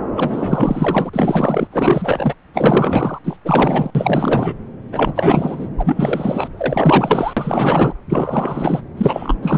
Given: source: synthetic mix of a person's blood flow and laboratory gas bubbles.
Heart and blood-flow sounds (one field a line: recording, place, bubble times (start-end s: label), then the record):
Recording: Doppler ultrasound of blood flow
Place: subclavian vein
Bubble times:
0.14-1.10 s: bubbles
1.13-1.68 s: bubbles
1.71-2.34 s: bubbles
2.54-3.19 s: bubbles
3.24-3.37 s: bubbles
3.45-3.90 s: bubbles
3.94-4.55 s: bubbles
4.92-5.69 s: bubbles
5.77-6.50 s: bubbles
6.57-7.33 s: bubbles
7.36-7.93 s: bubbles
8.09-8.82 s: bubbles
8.97-9.36 s: bubbles
9.42-9.58 s: bubbles
From the record:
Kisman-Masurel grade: 444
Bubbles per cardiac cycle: continuous sound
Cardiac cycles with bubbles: 100%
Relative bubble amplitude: maximal (0.775 to 0.999)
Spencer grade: 4 (maximum detectable bubble signal sounding continuously throughout systole and diastole of every cardiac period, and overriding the amplitude of the normal cardiac signals)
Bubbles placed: anywhere in the cardiac cycle